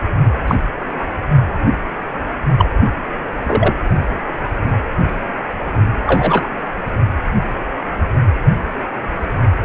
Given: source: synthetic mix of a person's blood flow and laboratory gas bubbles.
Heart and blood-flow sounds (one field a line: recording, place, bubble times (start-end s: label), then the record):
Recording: Doppler ultrasound of blood flow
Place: precordium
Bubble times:
0.47-0.55 s: bubbles
2.57-2.70 s: bubbles
3.48-3.73 s: bubbles
6.06-6.49 s: bubbles
From the record:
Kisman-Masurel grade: 123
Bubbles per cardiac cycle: 1 to 2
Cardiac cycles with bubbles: 10 to 50%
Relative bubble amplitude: loud (0.450 to 0.775)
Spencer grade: 2 (many but less than half of the cardiac periods contain bubble signals, singularly or in groups)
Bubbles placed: anywhere in the cardiac cycle